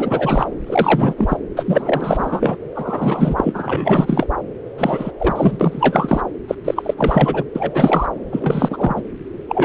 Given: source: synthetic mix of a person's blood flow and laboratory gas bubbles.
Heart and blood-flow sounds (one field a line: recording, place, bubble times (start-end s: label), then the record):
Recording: Doppler ultrasound of blood flow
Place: subclavian vein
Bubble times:
0.00-0.46 s: bubbles
0.67-1.14 s: bubbles
1.18-1.37 s: bubbles
1.56-2.56 s: bubbles
2.75-4.27 s: bubbles
4.78-5.12 s: bubbles
5.19-6.21 s: bubbles
6.47-6.55 s: bubbles
6.64-6.94 s: bubbles
6.96-7.43 s: bubbles
7.55-8.06 s: bubbles
8.31-9.02 s: bubbles
9.48-9.65 s: bubbles
From the record:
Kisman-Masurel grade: 343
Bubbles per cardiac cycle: rolling drumbeat, 9 or more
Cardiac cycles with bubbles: 100%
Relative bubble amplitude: loud (0.450 to 0.775)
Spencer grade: 3 (all of the cardiac periods contain showers or single bubble signals, but not dominating or overriding the cardiac motion signals)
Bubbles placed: anywhere in the cardiac cycle